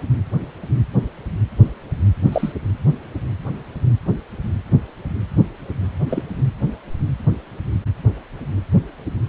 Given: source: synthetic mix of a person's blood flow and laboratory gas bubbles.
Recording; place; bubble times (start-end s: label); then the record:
Doppler ultrasound of blood flow; precordium
2.32-2.52 s: bubbles
6.10-6.22 s: bubbles
From the record:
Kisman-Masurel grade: 112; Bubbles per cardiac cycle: 1 to 2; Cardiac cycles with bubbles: 1 to 10%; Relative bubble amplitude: moderate (0.250 to 0.450); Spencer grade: 1 (occasional bubble signal discernible with the cardiac motion signal, with majority of cardiac periods free of bubbles); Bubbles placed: anywhere in the cardiac cycle